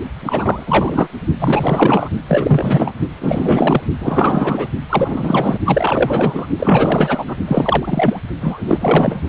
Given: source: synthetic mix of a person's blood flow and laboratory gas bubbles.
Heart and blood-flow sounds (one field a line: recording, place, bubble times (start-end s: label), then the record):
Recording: Doppler ultrasound of blood flow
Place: precordium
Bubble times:
0.22-0.63 s: bubbles
0.66-1.07 s: bubbles
1.40-2.09 s: bubbles
2.28-2.92 s: bubbles
3.20-3.82 s: bubbles
4.00-4.67 s: bubbles
4.89-5.58 s: bubbles
5.65-6.48 s: bubbles
6.58-7.35 s: bubbles
7.47-8.18 s: bubbles
8.41-9.21 s: bubbles
From the record:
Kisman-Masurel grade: 444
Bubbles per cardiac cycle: continuous sound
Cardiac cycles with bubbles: 100%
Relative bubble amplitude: maximal (0.775 to 0.999)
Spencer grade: 4 (maximum detectable bubble signal sounding continuously throughout systole and diastole of every cardiac period, and overriding the amplitude of the normal cardiac signals)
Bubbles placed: only in the low amplitude regions of the cardiac cycle